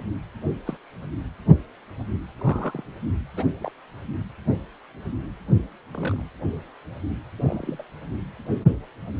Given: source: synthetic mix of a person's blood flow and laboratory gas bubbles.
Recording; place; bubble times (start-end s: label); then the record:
Doppler ultrasound of blood flow; precordium
0.67-0.77 s: bubbles
2.39-2.81 s: bubbles
3.37-3.44 s: bubbles
3.60-3.71 s: bubbles
5.94-6.25 s: bubbles
7.36-7.83 s: bubbles
From the record:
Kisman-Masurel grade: 121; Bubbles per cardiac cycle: 1 to 2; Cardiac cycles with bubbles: 10 to 50%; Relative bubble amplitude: barely perceptible (0.100 to 0.250); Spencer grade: 2 (many but less than half of the cardiac periods contain bubble signals, singularly or in groups); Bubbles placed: anywhere in the cardiac cycle